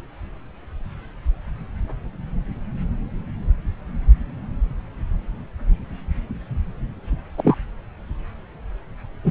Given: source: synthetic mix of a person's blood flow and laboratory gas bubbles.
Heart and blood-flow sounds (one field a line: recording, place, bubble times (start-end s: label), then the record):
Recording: Doppler ultrasound of blood flow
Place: subclavian vein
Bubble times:
7.38-7.57 s: bubbles
9.24-9.31 s: bubbles
From the record:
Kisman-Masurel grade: 113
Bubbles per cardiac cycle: 1 to 2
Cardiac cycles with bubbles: 1 to 10%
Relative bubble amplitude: loud (0.450 to 0.775)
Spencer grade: 1 (occasional bubble signal discernible with the cardiac motion signal, with majority of cardiac periods free of bubbles)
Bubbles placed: anywhere in the cardiac cycle